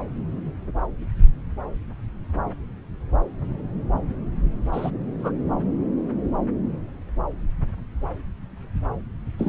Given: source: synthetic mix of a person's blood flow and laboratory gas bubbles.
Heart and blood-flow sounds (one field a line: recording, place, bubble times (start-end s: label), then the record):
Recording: Doppler ultrasound of blood flow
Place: subclavian vein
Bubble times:
4.73-4.91 s: bubbles
5.17-5.33 s: bubbles
9.38-9.49 s: bubbles
From the record:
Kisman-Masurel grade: 122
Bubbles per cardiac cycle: 1 to 2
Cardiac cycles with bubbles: 10 to 50%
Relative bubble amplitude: moderate (0.250 to 0.450)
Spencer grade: 2 (many but less than half of the cardiac periods contain bubble signals, singularly or in groups)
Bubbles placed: anywhere in the cardiac cycle